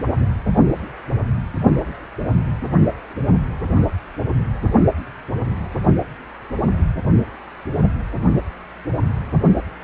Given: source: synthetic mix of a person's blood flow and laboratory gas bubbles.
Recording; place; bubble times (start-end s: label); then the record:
Doppler ultrasound of blood flow; precordium
no bubbles
From the record:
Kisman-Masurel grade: 000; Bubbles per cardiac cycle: 0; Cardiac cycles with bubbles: 0%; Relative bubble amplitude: no bubbles discernible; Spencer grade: 0 (complete lack of bubble signals)